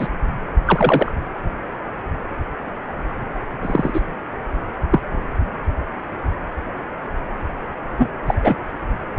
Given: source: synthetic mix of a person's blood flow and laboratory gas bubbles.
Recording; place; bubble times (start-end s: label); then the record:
Doppler ultrasound of blood flow; precordium
0.00-0.08 s: bubbles
0.67-1.11 s: bubbles
3.62-4.00 s: bubbles
4.93-5.00 s: bubbles
7.98-8.10 s: bubbles
8.27-8.35 s: bubbles
8.42-8.55 s: bubbles
From the record:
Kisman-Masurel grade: 123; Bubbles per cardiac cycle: 1 to 2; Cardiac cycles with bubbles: 10 to 50%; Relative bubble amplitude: loud (0.450 to 0.775); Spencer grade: 2 (many but less than half of the cardiac periods contain bubble signals, singularly or in groups); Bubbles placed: anywhere in the cardiac cycle